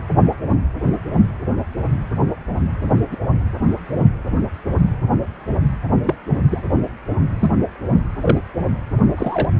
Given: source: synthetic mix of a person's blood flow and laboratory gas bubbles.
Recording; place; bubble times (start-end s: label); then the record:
Doppler ultrasound of blood flow; precordium
0.48-0.55 s: bubbles
3.11-3.17 s: bubbles
3.93-4.08 s: bubbles
6.04-6.15 s: bubbles
6.51-6.63 s: bubbles
7.41-7.52 s: bubbles
8.21-8.38 s: bubbles
9.17-9.50 s: bubbles
From the record:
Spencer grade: 2 (many but less than half of the cardiac periods contain bubble signals, singularly or in groups); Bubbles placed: anywhere in the cardiac cycle